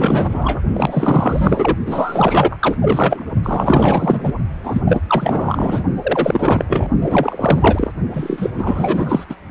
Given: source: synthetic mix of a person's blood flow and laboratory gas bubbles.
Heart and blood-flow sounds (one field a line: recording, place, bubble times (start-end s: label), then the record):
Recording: Doppler ultrasound of blood flow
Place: precordium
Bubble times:
0.00-0.60 s: bubbles
0.74-1.77 s: bubbles
1.86-2.78 s: bubbles
2.81-3.34 s: bubbles
3.43-4.33 s: bubbles
4.63-4.81 s: bubbles
4.86-5.00 s: bubbles
5.08-5.84 s: bubbles
6.03-6.65 s: bubbles
6.69-6.88 s: bubbles
7.00-7.92 s: bubbles
8.13-8.50 s: bubbles
8.58-9.25 s: bubbles
9.29-9.35 s: bubbles
From the record:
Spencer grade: 4 (maximum detectable bubble signal sounding continuously throughout systole and diastole of every cardiac period, and overriding the amplitude of the normal cardiac signals)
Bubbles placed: only in the low amplitude regions of the cardiac cycle